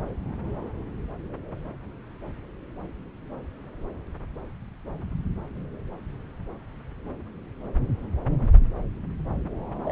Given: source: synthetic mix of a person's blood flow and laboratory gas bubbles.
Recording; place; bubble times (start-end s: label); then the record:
Doppler ultrasound of blood flow; subclavian vein
9.85-9.92 s: bubbles
From the record:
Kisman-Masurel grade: 211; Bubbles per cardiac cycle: several, 3 to 8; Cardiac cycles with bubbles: 1 to 10%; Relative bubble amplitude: barely perceptible (0.100 to 0.250); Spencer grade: 1 (occasional bubble signal discernible with the cardiac motion signal, with majority of cardiac periods free of bubbles); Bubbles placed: anywhere in the cardiac cycle